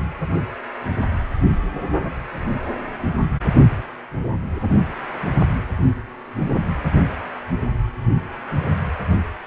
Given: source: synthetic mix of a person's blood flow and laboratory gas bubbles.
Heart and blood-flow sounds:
Doppler ultrasound of blood flow; precordium
no bubbles
From the record:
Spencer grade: 0 (complete lack of bubble signals)

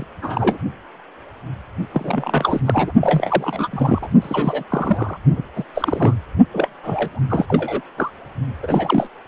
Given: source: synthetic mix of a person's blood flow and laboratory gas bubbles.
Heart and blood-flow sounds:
Doppler ultrasound of blood flow; precordium
0.00-0.07 s: bubbles
0.22-0.58 s: bubbles
1.93-2.61 s: bubbles
2.65-2.92 s: bubbles
3.01-3.68 s: bubbles
3.71-4.08 s: bubbles
4.21-4.63 s: bubbles
4.70-5.17 s: bubbles
5.30-5.42 s: bubbles
5.55-5.65 s: bubbles
5.75-6.15 s: bubbles
6.53-6.67 s: bubbles
6.83-7.20 s: bubbles
7.29-7.46 s: bubbles
7.48-7.82 s: bubbles
7.97-8.12 s: bubbles
8.62-9.09 s: bubbles
9.25-9.28 s: bubbles
From the record:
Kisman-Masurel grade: 332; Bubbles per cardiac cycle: rolling drumbeat, 9 or more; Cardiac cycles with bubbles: 50 to 99%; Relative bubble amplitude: moderate (0.250 to 0.450); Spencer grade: 3 (all of the cardiac periods contain showers or single bubble signals, but not dominating or overriding the cardiac motion signals); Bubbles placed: only in the low amplitude regions of the cardiac cycle

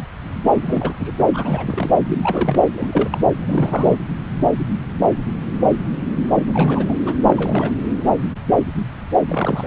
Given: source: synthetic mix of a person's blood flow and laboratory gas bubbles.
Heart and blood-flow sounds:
Doppler ultrasound of blood flow; subclavian vein
0.52-0.96 s: bubbles
1.00-1.12 s: bubbles
1.19-1.29 s: bubbles
1.33-1.91 s: bubbles
2.07-2.62 s: bubbles
2.67-3.19 s: bubbles
3.41-3.96 s: bubbles
6.48-6.94 s: bubbles
7.06-7.14 s: bubbles
7.24-7.71 s: bubbles
9.26-9.66 s: bubbles
From the record:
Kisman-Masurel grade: 332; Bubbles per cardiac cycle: rolling drumbeat, 9 or more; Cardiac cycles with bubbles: 50 to 99%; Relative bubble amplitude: moderate (0.250 to 0.450); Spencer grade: 3 (all of the cardiac periods contain showers or single bubble signals, but not dominating or overriding the cardiac motion signals); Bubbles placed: anywhere in the cardiac cycle

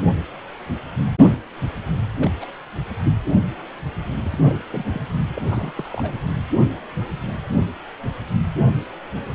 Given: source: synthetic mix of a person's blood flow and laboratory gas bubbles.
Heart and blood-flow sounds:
Doppler ultrasound of blood flow; precordium
2.14-2.30 s: bubbles
2.40-2.45 s: bubbles
3.03-3.13 s: bubbles
4.22-4.63 s: bubbles
4.70-4.85 s: bubbles
4.90-5.02 s: bubbles
5.34-5.73 s: bubbles
5.77-5.89 s: bubbles
5.92-6.18 s: bubbles
From the record:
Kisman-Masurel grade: 221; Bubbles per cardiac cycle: several, 3 to 8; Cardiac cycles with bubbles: 10 to 50%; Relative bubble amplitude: barely perceptible (0.100 to 0.250); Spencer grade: 2 (many but less than half of the cardiac periods contain bubble signals, singularly or in groups); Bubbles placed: anywhere in the cardiac cycle

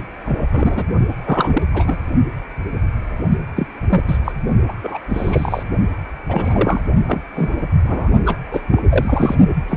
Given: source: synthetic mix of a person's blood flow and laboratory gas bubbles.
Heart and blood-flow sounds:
Doppler ultrasound of blood flow; precordium
0.00-0.04 s: bubbles
0.26-0.47 s: bubbles
0.52-0.87 s: bubbles
1.27-1.62 s: bubbles
1.74-1.97 s: bubbles
3.56-3.67 s: bubbles
3.90-4.02 s: bubbles
4.08-4.18 s: bubbles
4.24-4.32 s: bubbles
4.68-4.73 s: bubbles
4.83-4.98 s: bubbles
5.09-5.63 s: bubbles
6.29-6.83 s: bubbles
7.08-7.22 s: bubbles
7.35-7.64 s: bubbles
7.84-8.09 s: bubbles
8.25-8.38 s: bubbles
8.52-8.61 s: bubbles
8.71-8.83 s: bubbles
8.89-9.36 s: bubbles
9.68-9.77 s: bubbles
From the record:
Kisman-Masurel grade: 232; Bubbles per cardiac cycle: several, 3 to 8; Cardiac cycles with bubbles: 50 to 99%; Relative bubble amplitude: moderate (0.250 to 0.450); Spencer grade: 3 (all of the cardiac periods contain showers or single bubble signals, but not dominating or overriding the cardiac motion signals); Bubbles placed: only in the low amplitude regions of the cardiac cycle

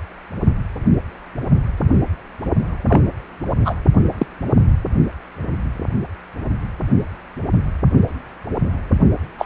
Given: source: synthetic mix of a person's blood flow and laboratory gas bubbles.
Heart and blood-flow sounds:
Doppler ultrasound of blood flow; precordium
2.88-3.01 s: bubbles
3.65-3.75 s: bubbles
4.17-4.26 s: bubbles
9.38-9.46 s: bubbles
From the record:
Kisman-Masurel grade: 123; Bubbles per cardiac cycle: 1 to 2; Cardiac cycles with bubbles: 10 to 50%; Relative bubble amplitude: loud (0.450 to 0.775); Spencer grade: 2 (many but less than half of the cardiac periods contain bubble signals, singularly or in groups); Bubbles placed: only in the low amplitude regions of the cardiac cycle

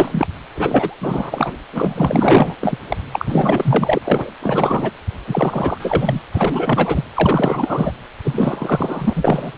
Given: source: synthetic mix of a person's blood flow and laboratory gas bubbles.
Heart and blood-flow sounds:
Doppler ultrasound of blood flow; precordium
0.00-0.27 s: bubbles
0.55-0.94 s: bubbles
1.00-1.57 s: bubbles
1.70-2.55 s: bubbles
2.61-2.79 s: bubbles
2.88-2.96 s: bubbles
3.12-3.99 s: bubbles
4.04-4.29 s: bubbles
4.41-4.91 s: bubbles
5.27-6.20 s: bubbles
6.31-7.04 s: bubbles
7.14-7.92 s: bubbles
8.24-9.52 s: bubbles
From the record:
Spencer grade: 4 (maximum detectable bubble signal sounding continuously throughout systole and diastole of every cardiac period, and overriding the amplitude of the normal cardiac signals); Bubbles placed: anywhere in the cardiac cycle

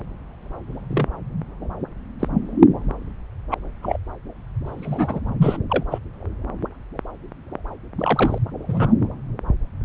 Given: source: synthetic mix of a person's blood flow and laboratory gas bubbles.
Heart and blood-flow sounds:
Doppler ultrasound of blood flow; subclavian vein
0.91-1.06 s: bubbles
2.19-2.27 s: bubbles
3.50-3.54 s: bubbles
3.81-3.97 s: bubbles
4.66-5.20 s: bubbles
5.41-5.57 s: bubbles
5.69-5.84 s: bubbles
5.91-5.98 s: bubbles
7.98-8.38 s: bubbles
8.68-8.93 s: bubbles
From the record:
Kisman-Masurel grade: 122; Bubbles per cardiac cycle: 1 to 2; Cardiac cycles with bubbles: 10 to 50%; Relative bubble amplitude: moderate (0.250 to 0.450); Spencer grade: 2 (many but less than half of the cardiac periods contain bubble signals, singularly or in groups); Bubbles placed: anywhere in the cardiac cycle

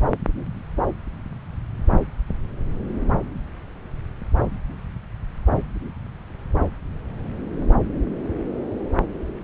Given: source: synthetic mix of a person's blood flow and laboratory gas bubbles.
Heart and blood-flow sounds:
Doppler ultrasound of blood flow; subclavian vein
no bubbles
From the record:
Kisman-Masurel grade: 000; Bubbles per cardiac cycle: 0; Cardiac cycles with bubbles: 0%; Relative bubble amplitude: no bubbles discernible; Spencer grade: 0 (complete lack of bubble signals)

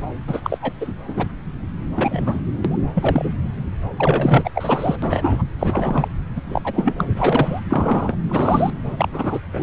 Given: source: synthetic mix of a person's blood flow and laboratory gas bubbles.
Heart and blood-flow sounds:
Doppler ultrasound of blood flow; subclavian vein
0.00-0.02 s: bubbles
0.27-0.58 s: bubbles
0.62-0.72 s: bubbles
0.80-0.94 s: bubbles
1.07-1.27 s: bubbles
1.96-2.42 s: bubbles
2.64-2.78 s: bubbles
2.95-3.33 s: bubbles
3.96-4.50 s: bubbles
4.55-4.96 s: bubbles
5.02-5.44 s: bubbles
5.59-6.08 s: bubbles
6.35-6.42 s: bubbles
6.49-6.61 s: bubbles
6.63-6.94 s: bubbles
6.98-7.04 s: bubbles
7.11-7.60 s: bubbles
7.70-8.17 s: bubbles
8.28-8.71 s: bubbles
8.97-9.08 s: bubbles
9.11-9.39 s: bubbles
9.53-9.63 s: bubbles
From the record:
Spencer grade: 3 (all of the cardiac periods contain showers or single bubble signals, but not dominating or overriding the cardiac motion signals); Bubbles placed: anywhere in the cardiac cycle

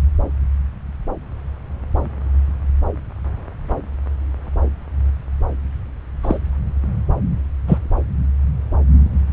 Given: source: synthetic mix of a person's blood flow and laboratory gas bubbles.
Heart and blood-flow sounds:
Doppler ultrasound of blood flow; subclavian vein
6.22-6.38 s: bubbles
7.67-7.78 s: bubbles
From the record:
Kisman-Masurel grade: 123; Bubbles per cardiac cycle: 1 to 2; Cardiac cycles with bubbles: 10 to 50%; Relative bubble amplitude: loud (0.450 to 0.775); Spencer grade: 2 (many but less than half of the cardiac periods contain bubble signals, singularly or in groups); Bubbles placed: anywhere in the cardiac cycle

